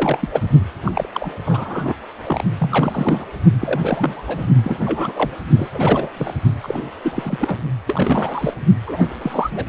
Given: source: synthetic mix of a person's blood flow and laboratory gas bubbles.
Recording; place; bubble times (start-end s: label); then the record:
Doppler ultrasound of blood flow; precordium
0.00-0.28 s: bubbles
0.32-0.40 s: bubbles
0.85-1.09 s: bubbles
1.14-1.32 s: bubbles
1.46-1.94 s: bubbles
2.27-2.44 s: bubbles
2.58-3.27 s: bubbles
3.61-4.23 s: bubbles
4.27-4.46 s: bubbles
4.64-4.79 s: bubbles
4.86-5.31 s: bubbles
5.57-5.68 s: bubbles
5.74-6.09 s: bubbles
6.17-6.34 s: bubbles
6.63-6.85 s: bubbles
7.03-7.57 s: bubbles
7.88-8.54 s: bubbles
8.87-9.06 s: bubbles
9.21-9.64 s: bubbles
From the record:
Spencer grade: 3 (all of the cardiac periods contain showers or single bubble signals, but not dominating or overriding the cardiac motion signals); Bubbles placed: only in the low amplitude regions of the cardiac cycle